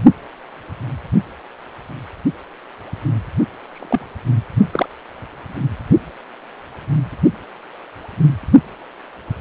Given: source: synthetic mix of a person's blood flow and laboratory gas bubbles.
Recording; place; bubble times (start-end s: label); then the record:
Doppler ultrasound of blood flow; precordium
3.72-4.07 s: bubbles
4.71-4.88 s: bubbles
From the record:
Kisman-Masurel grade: 122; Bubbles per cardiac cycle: 1 to 2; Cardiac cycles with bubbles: 10 to 50%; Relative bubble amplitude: moderate (0.250 to 0.450); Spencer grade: 2 (many but less than half of the cardiac periods contain bubble signals, singularly or in groups); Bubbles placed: only in the low amplitude regions of the cardiac cycle